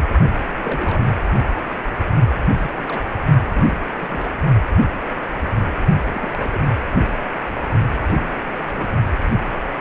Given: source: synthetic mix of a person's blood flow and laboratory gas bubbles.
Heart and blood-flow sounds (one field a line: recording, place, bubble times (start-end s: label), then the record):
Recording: Doppler ultrasound of blood flow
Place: precordium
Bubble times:
0.62-1.18 s: bubbles
2.58-2.85 s: bubbles
2.88-3.03 s: bubbles
3.54-3.77 s: bubbles
3.93-4.31 s: bubbles
6.15-6.58 s: bubbles
6.98-7.06 s: bubbles
8.03-8.45 s: bubbles
8.67-8.88 s: bubbles
From the record:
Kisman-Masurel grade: 221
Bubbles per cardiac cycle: several, 3 to 8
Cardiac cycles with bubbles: 10 to 50%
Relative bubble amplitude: barely perceptible (0.100 to 0.250)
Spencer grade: 2 (many but less than half of the cardiac periods contain bubble signals, singularly or in groups)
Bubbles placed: only in the low amplitude regions of the cardiac cycle